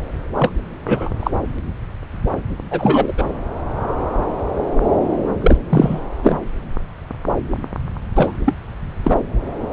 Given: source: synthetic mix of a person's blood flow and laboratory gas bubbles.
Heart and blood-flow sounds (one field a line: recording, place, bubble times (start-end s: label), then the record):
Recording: Doppler ultrasound of blood flow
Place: subclavian vein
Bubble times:
0.36-0.51 s: bubbles
0.86-1.10 s: bubbles
1.20-1.31 s: bubbles
2.71-3.13 s: bubbles
3.17-3.25 s: bubbles
5.40-5.57 s: bubbles
5.69-6.01 s: bubbles
6.22-6.39 s: bubbles
8.16-8.33 s: bubbles
8.46-8.54 s: bubbles
9.04-9.17 s: bubbles
From the record:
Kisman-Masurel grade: 233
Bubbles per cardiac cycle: several, 3 to 8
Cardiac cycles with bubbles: 50 to 99%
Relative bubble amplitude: loud (0.450 to 0.775)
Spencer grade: 3 (all of the cardiac periods contain showers or single bubble signals, but not dominating or overriding the cardiac motion signals)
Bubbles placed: anywhere in the cardiac cycle